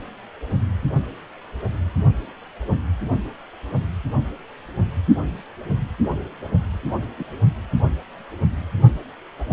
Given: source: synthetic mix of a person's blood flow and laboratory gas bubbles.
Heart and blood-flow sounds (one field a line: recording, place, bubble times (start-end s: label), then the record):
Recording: Doppler ultrasound of blood flow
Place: precordium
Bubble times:
7.18-7.24 s: bubbles
From the record:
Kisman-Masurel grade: 112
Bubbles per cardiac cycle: 1 to 2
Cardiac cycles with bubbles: 1 to 10%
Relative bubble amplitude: moderate (0.250 to 0.450)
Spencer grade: 1 (occasional bubble signal discernible with the cardiac motion signal, with majority of cardiac periods free of bubbles)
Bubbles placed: only in the low amplitude regions of the cardiac cycle